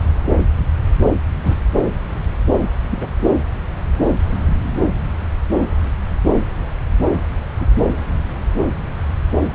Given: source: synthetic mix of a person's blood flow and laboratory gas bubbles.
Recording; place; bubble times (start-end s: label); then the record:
Doppler ultrasound of blood flow; subclavian vein
1.43-1.56 s: bubbles
2.90-3.07 s: bubbles
7.58-7.67 s: bubbles
From the record:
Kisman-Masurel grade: 122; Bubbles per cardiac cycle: 1 to 2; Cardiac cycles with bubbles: 10 to 50%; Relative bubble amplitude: moderate (0.250 to 0.450); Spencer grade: 2 (many but less than half of the cardiac periods contain bubble signals, singularly or in groups); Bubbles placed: anywhere in the cardiac cycle